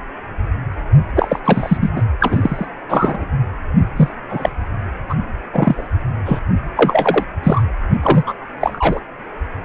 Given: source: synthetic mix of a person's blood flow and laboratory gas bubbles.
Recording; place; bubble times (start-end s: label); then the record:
Doppler ultrasound of blood flow; precordium
1.16-1.40 s: bubbles
1.44-1.78 s: bubbles
1.80-1.92 s: bubbles
1.96-2.02 s: bubbles
2.20-2.67 s: bubbles
2.89-3.26 s: bubbles
3.96-4.08 s: bubbles
4.29-4.54 s: bubbles
5.09-5.15 s: bubbles
5.53-5.83 s: bubbles
6.25-6.40 s: bubbles
6.76-7.24 s: bubbles
7.43-7.62 s: bubbles
8.02-8.23 s: bubbles
8.26-8.34 s: bubbles
8.60-9.00 s: bubbles
From the record:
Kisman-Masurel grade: 233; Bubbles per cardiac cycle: several, 3 to 8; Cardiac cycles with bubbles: 50 to 99%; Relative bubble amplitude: loud (0.450 to 0.775); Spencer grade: 3 (all of the cardiac periods contain showers or single bubble signals, but not dominating or overriding the cardiac motion signals); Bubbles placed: anywhere in the cardiac cycle